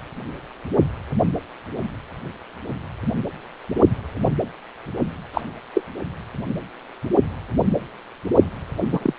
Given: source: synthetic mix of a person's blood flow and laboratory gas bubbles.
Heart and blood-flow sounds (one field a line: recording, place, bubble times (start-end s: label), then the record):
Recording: Doppler ultrasound of blood flow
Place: precordium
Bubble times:
5.33-5.41 s: bubbles
5.74-5.82 s: bubbles
8.81-9.13 s: bubbles
From the record:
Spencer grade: 2 (many but less than half of the cardiac periods contain bubble signals, singularly or in groups)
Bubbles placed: anywhere in the cardiac cycle